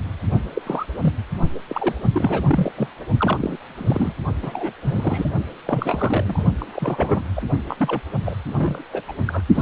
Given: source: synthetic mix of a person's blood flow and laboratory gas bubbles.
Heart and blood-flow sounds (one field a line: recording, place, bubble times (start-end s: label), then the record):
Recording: Doppler ultrasound of blood flow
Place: precordium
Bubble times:
0.00-0.02 s: bubbles
0.55-0.61 s: bubbles
0.66-0.86 s: bubbles
1.01-1.13 s: bubbles
1.54-1.60 s: bubbles
1.69-1.96 s: bubbles
2.14-2.72 s: bubbles
2.76-2.89 s: bubbles
3.20-3.57 s: bubbles
3.75-4.13 s: bubbles
4.42-4.73 s: bubbles
4.84-5.30 s: bubbles
5.66-6.46 s: bubbles
6.59-7.25 s: bubbles
7.36-7.42 s: bubbles
7.68-8.01 s: bubbles
8.25-8.36 s: bubbles
8.47-8.53 s: bubbles
8.57-8.81 s: bubbles
8.92-9.03 s: bubbles
9.07-9.12 s: bubbles
9.27-9.42 s: bubbles
9.54-9.61 s: bubbles
From the record:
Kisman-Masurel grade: 342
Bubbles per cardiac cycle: rolling drumbeat, 9 or more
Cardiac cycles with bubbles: 100%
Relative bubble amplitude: moderate (0.250 to 0.450)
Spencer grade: 3 (all of the cardiac periods contain showers or single bubble signals, but not dominating or overriding the cardiac motion signals)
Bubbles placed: only in the low amplitude regions of the cardiac cycle